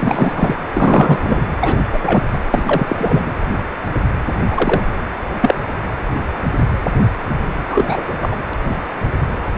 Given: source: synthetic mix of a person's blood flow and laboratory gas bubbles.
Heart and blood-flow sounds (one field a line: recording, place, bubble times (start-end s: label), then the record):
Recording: Doppler ultrasound of blood flow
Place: precordium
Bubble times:
0.00-0.55 s: bubbles
0.73-1.45 s: bubbles
1.60-1.80 s: bubbles
1.92-1.98 s: bubbles
2.03-2.23 s: bubbles
2.31-2.40 s: bubbles
2.54-3.33 s: bubbles
4.50-4.82 s: bubbles
5.42-5.54 s: bubbles
7.68-8.15 s: bubbles
8.21-8.37 s: bubbles
From the record:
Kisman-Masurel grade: 233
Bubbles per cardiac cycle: several, 3 to 8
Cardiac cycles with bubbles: 50 to 99%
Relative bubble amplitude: loud (0.450 to 0.775)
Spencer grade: 3 (all of the cardiac periods contain showers or single bubble signals, but not dominating or overriding the cardiac motion signals)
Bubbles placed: anywhere in the cardiac cycle